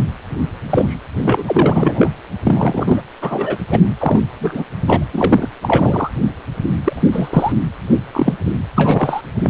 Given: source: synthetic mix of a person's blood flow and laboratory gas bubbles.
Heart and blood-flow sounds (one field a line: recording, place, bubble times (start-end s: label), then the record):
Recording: Doppler ultrasound of blood flow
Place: precordium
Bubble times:
0.69-0.95 s: bubbles
1.24-1.43 s: bubbles
1.46-2.12 s: bubbles
2.44-3.02 s: bubbles
3.21-3.58 s: bubbles
3.70-3.79 s: bubbles
3.99-4.21 s: bubbles
4.40-4.65 s: bubbles
4.87-5.05 s: bubbles
5.12-5.48 s: bubbles
5.62-6.11 s: bubbles
6.84-7.52 s: bubbles
8.12-8.37 s: bubbles
8.75-9.21 s: bubbles
9.42-9.50 s: bubbles
From the record:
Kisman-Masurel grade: 243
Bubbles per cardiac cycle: several, 3 to 8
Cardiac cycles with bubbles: 100%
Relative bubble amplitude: loud (0.450 to 0.775)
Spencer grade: 3 (all of the cardiac periods contain showers or single bubble signals, but not dominating or overriding the cardiac motion signals)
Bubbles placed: anywhere in the cardiac cycle